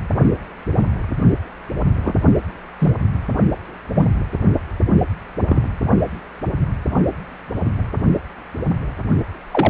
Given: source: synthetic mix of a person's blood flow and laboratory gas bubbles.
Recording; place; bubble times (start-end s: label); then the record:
Doppler ultrasound of blood flow; precordium
2.04-2.16 s: bubbles
2.79-2.93 s: bubbles
3.95-4.08 s: bubbles
5.48-5.63 s: bubbles
9.51-9.70 s: bubbles
From the record:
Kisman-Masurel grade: 122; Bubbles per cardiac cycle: 1 to 2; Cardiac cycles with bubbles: 10 to 50%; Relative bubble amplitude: moderate (0.250 to 0.450); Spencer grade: 2 (many but less than half of the cardiac periods contain bubble signals, singularly or in groups); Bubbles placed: only in the low amplitude regions of the cardiac cycle